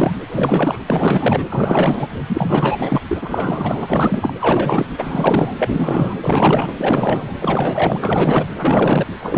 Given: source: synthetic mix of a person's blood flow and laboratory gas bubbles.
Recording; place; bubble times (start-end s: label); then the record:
Doppler ultrasound of blood flow; precordium
0.00-0.12 s: bubbles
0.29-0.83 s: bubbles
0.87-1.44 s: bubbles
1.49-2.07 s: bubbles
2.26-3.00 s: bubbles
3.07-4.33 s: bubbles
4.41-4.88 s: bubbles
4.98-5.56 s: bubbles
5.58-6.17 s: bubbles
6.21-6.74 s: bubbles
6.78-7.34 s: bubbles
7.41-7.98 s: bubbles
8.00-8.46 s: bubbles
8.57-9.06 s: bubbles
9.19-9.38 s: bubbles
From the record:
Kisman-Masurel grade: 444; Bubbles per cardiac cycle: continuous sound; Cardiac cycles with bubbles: 100%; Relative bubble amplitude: maximal (0.775 to 0.999); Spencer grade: 4 (maximum detectable bubble signal sounding continuously throughout systole and diastole of every cardiac period, and overriding the amplitude of the normal cardiac signals); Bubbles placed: anywhere in the cardiac cycle